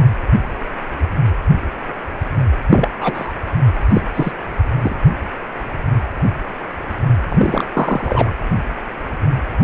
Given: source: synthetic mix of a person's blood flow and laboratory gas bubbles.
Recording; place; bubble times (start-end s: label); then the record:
Doppler ultrasound of blood flow; precordium
2.71-2.88 s: bubbles
3.00-3.33 s: bubbles
3.88-4.01 s: bubbles
4.14-4.33 s: bubbles
4.82-4.96 s: bubbles
7.29-7.64 s: bubbles
7.73-8.32 s: bubbles
From the record:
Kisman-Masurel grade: 223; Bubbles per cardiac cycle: several, 3 to 8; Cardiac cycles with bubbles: 10 to 50%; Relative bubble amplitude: loud (0.450 to 0.775); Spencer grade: 2 (many but less than half of the cardiac periods contain bubble signals, singularly or in groups); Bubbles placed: anywhere in the cardiac cycle